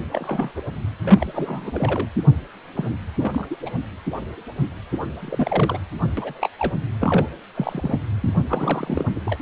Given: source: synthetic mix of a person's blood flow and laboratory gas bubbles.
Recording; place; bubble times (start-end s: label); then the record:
Doppler ultrasound of blood flow; precordium
0.12-0.52 s: bubbles
0.56-0.62 s: bubbles
1.04-2.09 s: bubbles
2.75-2.93 s: bubbles
3.19-3.47 s: bubbles
3.50-3.56 s: bubbles
3.66-3.70 s: bubbles
4.92-4.97 s: bubbles
5.20-5.79 s: bubbles
6.03-6.08 s: bubbles
6.17-6.50 s: bubbles
6.58-6.79 s: bubbles
7.00-7.29 s: bubbles
7.54-8.00 s: bubbles
8.21-8.34 s: bubbles
8.48-9.13 s: bubbles
9.15-9.20 s: bubbles
9.24-9.38 s: bubbles
From the record:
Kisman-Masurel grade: 242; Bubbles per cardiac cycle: several, 3 to 8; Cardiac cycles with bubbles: 100%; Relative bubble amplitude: moderate (0.250 to 0.450); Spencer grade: 3 (all of the cardiac periods contain showers or single bubble signals, but not dominating or overriding the cardiac motion signals); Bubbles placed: anywhere in the cardiac cycle